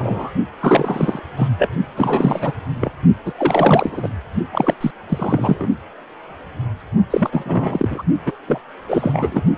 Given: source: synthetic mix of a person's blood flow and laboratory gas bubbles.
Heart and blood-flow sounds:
Doppler ultrasound of blood flow; precordium
0.00-0.32 s: bubbles
0.60-1.19 s: bubbles
1.36-1.48 s: bubbles
1.58-1.69 s: bubbles
1.96-2.52 s: bubbles
2.80-2.92 s: bubbles
3.25-3.33 s: bubbles
3.37-4.09 s: bubbles
4.52-4.74 s: bubbles
4.80-4.91 s: bubbles
5.09-5.67 s: bubbles
7.10-8.04 s: bubbles
8.26-8.32 s: bubbles
8.47-8.60 s: bubbles
8.88-9.43 s: bubbles
From the record:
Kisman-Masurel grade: 333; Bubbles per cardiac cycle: rolling drumbeat, 9 or more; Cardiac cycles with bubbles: 50 to 99%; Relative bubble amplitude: loud (0.450 to 0.775); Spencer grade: 3 (all of the cardiac periods contain showers or single bubble signals, but not dominating or overriding the cardiac motion signals); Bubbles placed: only in the low amplitude regions of the cardiac cycle

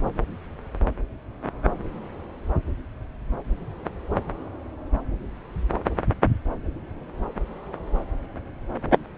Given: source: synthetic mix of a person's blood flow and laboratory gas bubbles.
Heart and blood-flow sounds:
Doppler ultrasound of blood flow; subclavian vein
no bubbles
From the record:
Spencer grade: 0 (complete lack of bubble signals)

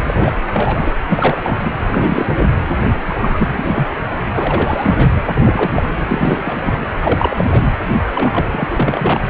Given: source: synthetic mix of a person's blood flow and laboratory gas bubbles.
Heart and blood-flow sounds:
Doppler ultrasound of blood flow; precordium
0.03-0.36 s: bubbles
0.47-0.93 s: bubbles
1.08-1.39 s: bubbles
1.43-1.73 s: bubbles
1.87-2.60 s: bubbles
3.05-3.15 s: bubbles
3.21-3.90 s: bubbles
4.16-4.19 s: bubbles
4.33-5.10 s: bubbles
5.35-6.04 s: bubbles
6.08-6.42 s: bubbles
6.44-6.58 s: bubbles
6.65-6.77 s: bubbles
7.01-7.63 s: bubbles
8.14-8.68 s: bubbles
8.71-9.21 s: bubbles
From the record:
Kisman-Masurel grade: 343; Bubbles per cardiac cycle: rolling drumbeat, 9 or more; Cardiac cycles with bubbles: 100%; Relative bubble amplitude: loud (0.450 to 0.775); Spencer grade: 3 (all of the cardiac periods contain showers or single bubble signals, but not dominating or overriding the cardiac motion signals); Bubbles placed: anywhere in the cardiac cycle

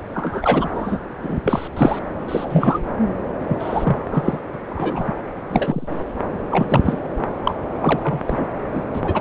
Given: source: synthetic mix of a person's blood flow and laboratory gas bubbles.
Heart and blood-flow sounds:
Doppler ultrasound of blood flow; subclavian vein
0.14-0.99 s: bubbles
1.23-1.39 s: bubbles
1.45-1.68 s: bubbles
1.76-1.99 s: bubbles
2.28-2.79 s: bubbles
3.48-3.97 s: bubbles
4.11-4.39 s: bubbles
4.53-4.56 s: bubbles
4.67-5.12 s: bubbles
5.50-5.88 s: bubbles
6.50-6.98 s: bubbles
7.43-7.54 s: bubbles
7.81-8.19 s: bubbles
8.27-8.47 s: bubbles
8.71-8.83 s: bubbles
8.93-9.01 s: bubbles
9.04-9.21 s: bubbles
From the record:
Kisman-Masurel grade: 243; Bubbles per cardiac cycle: several, 3 to 8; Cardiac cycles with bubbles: 100%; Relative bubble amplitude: loud (0.450 to 0.775); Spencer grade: 3 (all of the cardiac periods contain showers or single bubble signals, but not dominating or overriding the cardiac motion signals); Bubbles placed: anywhere in the cardiac cycle

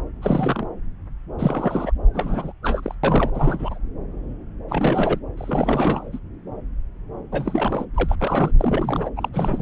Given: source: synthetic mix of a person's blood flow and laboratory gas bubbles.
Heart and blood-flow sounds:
Doppler ultrasound of blood flow; subclavian vein
0.22-0.68 s: bubbles
1.39-1.91 s: bubbles
2.14-2.53 s: bubbles
2.63-2.95 s: bubbles
3.04-3.31 s: bubbles
3.33-3.79 s: bubbles
4.68-5.19 s: bubbles
5.37-6.19 s: bubbles
7.32-7.85 s: bubbles
7.95-8.15 s: bubbles
8.20-8.51 s: bubbles
8.58-9.09 s: bubbles
9.16-9.29 s: bubbles
9.33-9.62 s: bubbles
From the record:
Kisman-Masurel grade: 332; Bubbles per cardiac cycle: rolling drumbeat, 9 or more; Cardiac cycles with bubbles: 50 to 99%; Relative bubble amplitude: moderate (0.250 to 0.450); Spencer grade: 3 (all of the cardiac periods contain showers or single bubble signals, but not dominating or overriding the cardiac motion signals); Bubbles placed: anywhere in the cardiac cycle

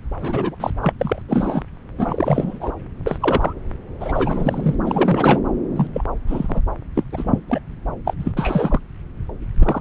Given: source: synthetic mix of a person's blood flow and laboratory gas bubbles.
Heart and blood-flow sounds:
Doppler ultrasound of blood flow; subclavian vein
0.20-0.55 s: bubbles
0.60-0.70 s: bubbles
0.81-0.92 s: bubbles
0.99-1.22 s: bubbles
1.29-1.62 s: bubbles
1.98-2.72 s: bubbles
3.06-3.53 s: bubbles
4.00-4.75 s: bubbles
4.86-5.40 s: bubbles
5.75-5.87 s: bubbles
5.94-6.04 s: bubbles
6.27-6.61 s: bubbles
6.95-7.04 s: bubbles
7.11-7.41 s: bubbles
7.48-7.60 s: bubbles
8.04-8.13 s: bubbles
8.19-8.32 s: bubbles
8.36-8.80 s: bubbles
9.59-9.81 s: bubbles
From the record:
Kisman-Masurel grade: 242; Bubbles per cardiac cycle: several, 3 to 8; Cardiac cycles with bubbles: 100%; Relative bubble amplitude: moderate (0.250 to 0.450); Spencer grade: 3 (all of the cardiac periods contain showers or single bubble signals, but not dominating or overriding the cardiac motion signals); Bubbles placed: anywhere in the cardiac cycle

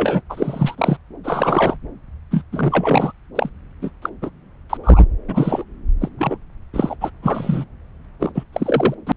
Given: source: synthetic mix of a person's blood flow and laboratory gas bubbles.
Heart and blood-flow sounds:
Doppler ultrasound of blood flow; subclavian vein
0.00-0.21 s: bubbles
0.29-0.97 s: bubbles
1.23-1.77 s: bubbles
2.30-2.43 s: bubbles
2.52-3.12 s: bubbles
3.35-3.49 s: bubbles
3.81-3.90 s: bubbles
4.02-4.10 s: bubbles
4.22-4.30 s: bubbles
4.70-4.78 s: bubbles
4.83-5.04 s: bubbles
5.28-5.64 s: bubbles
6.00-6.09 s: bubbles
6.18-6.37 s: bubbles
6.73-6.96 s: bubbles
7.00-7.11 s: bubbles
7.22-7.65 s: bubbles
8.20-8.31 s: bubbles
8.34-8.44 s: bubbles
8.52-8.95 s: bubbles
9.06-9.12 s: bubbles
From the record:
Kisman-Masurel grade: 243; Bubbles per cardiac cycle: several, 3 to 8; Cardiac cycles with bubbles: 100%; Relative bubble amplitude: loud (0.450 to 0.775); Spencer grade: 3 (all of the cardiac periods contain showers or single bubble signals, but not dominating or overriding the cardiac motion signals); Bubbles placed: anywhere in the cardiac cycle

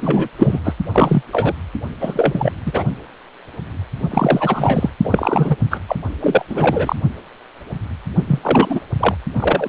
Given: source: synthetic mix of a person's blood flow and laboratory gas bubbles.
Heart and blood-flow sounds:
Doppler ultrasound of blood flow; precordium
0.00-0.28 s: bubbles
0.38-0.59 s: bubbles
0.64-0.74 s: bubbles
0.92-1.23 s: bubbles
1.32-1.54 s: bubbles
2.00-2.52 s: bubbles
2.66-2.83 s: bubbles
4.10-4.90 s: bubbles
5.04-5.56 s: bubbles
5.70-5.80 s: bubbles
5.88-5.96 s: bubbles
6.20-6.45 s: bubbles
6.49-6.96 s: bubbles
8.27-8.82 s: bubbles
9.00-9.15 s: bubbles
9.35-9.69 s: bubbles
From the record:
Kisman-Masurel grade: 333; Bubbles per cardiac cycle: rolling drumbeat, 9 or more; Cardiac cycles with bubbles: 50 to 99%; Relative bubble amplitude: loud (0.450 to 0.775); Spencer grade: 3 (all of the cardiac periods contain showers or single bubble signals, but not dominating or overriding the cardiac motion signals); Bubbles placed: only in the low amplitude regions of the cardiac cycle

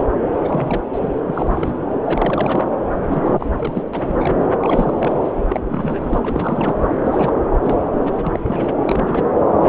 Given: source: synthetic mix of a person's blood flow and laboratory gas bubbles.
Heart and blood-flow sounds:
Doppler ultrasound of blood flow; subclavian vein
0.00-0.07 s: bubbles
0.31-0.81 s: bubbles
0.92-1.13 s: bubbles
1.27-1.73 s: bubbles
2.04-2.69 s: bubbles
2.93-3.46 s: bubbles
3.56-3.88 s: bubbles
3.94-4.15 s: bubbles
4.20-4.32 s: bubbles
4.60-5.31 s: bubbles
5.50-5.61 s: bubbles
5.69-6.76 s: bubbles
7.02-7.48 s: bubbles
7.62-7.79 s: bubbles
8.01-8.77 s: bubbles
8.79-9.29 s: bubbles
9.61-9.69 s: bubbles
From the record:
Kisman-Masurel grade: 342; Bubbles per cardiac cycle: rolling drumbeat, 9 or more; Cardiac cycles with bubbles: 100%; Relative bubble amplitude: moderate (0.250 to 0.450); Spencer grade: 3 (all of the cardiac periods contain showers or single bubble signals, but not dominating or overriding the cardiac motion signals); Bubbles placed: anywhere in the cardiac cycle

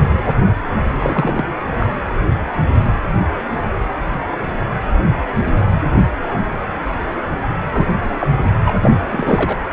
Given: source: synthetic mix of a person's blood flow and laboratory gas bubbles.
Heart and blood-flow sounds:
Doppler ultrasound of blood flow; precordium
0.99-1.43 s: bubbles
1.80-1.86 s: bubbles
7.72-7.86 s: bubbles
8.19-8.27 s: bubbles
8.42-8.50 s: bubbles
8.65-8.71 s: bubbles
8.81-8.92 s: bubbles
9.12-9.62 s: bubbles
From the record:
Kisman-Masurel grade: 232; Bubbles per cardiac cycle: several, 3 to 8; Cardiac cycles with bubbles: 50 to 99%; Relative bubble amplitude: moderate (0.250 to 0.450); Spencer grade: 3 (all of the cardiac periods contain showers or single bubble signals, but not dominating or overriding the cardiac motion signals); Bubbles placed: anywhere in the cardiac cycle

